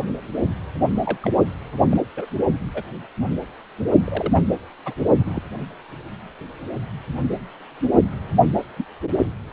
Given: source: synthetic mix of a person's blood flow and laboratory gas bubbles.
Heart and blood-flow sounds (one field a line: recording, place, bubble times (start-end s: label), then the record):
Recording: Doppler ultrasound of blood flow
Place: precordium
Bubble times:
1.05-1.17 s: bubbles
1.22-1.31 s: bubbles
1.91-1.98 s: bubbles
2.17-2.25 s: bubbles
2.74-2.83 s: bubbles
4.04-4.45 s: bubbles
4.85-4.93 s: bubbles
5.19-5.42 s: bubbles
8.76-8.85 s: bubbles
From the record:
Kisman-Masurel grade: 121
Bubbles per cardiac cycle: 1 to 2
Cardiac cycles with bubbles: 10 to 50%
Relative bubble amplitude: barely perceptible (0.100 to 0.250)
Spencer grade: 2 (many but less than half of the cardiac periods contain bubble signals, singularly or in groups)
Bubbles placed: anywhere in the cardiac cycle